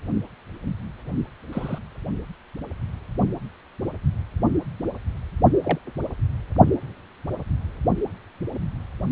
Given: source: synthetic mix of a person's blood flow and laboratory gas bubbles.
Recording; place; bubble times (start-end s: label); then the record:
Doppler ultrasound of blood flow; precordium
1.52-1.79 s: bubbles
5.64-5.79 s: bubbles
From the record:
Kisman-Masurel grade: 121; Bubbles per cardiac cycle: 1 to 2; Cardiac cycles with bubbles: 10 to 50%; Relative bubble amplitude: barely perceptible (0.100 to 0.250); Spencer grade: 2 (many but less than half of the cardiac periods contain bubble signals, singularly or in groups); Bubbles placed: anywhere in the cardiac cycle